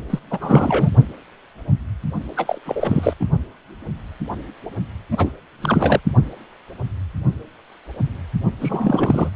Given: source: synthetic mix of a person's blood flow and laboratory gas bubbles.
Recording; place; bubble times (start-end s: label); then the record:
Doppler ultrasound of blood flow; precordium
0.10-0.19 s: bubbles
0.30-0.90 s: bubbles
2.36-2.60 s: bubbles
2.65-3.14 s: bubbles
3.19-3.26 s: bubbles
5.11-5.33 s: bubbles
5.62-6.00 s: bubbles
8.60-9.30 s: bubbles
From the record:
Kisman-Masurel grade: 333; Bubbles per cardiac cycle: rolling drumbeat, 9 or more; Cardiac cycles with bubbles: 50 to 99%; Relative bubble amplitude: loud (0.450 to 0.775); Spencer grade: 3 (all of the cardiac periods contain showers or single bubble signals, but not dominating or overriding the cardiac motion signals); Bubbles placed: only in the low amplitude regions of the cardiac cycle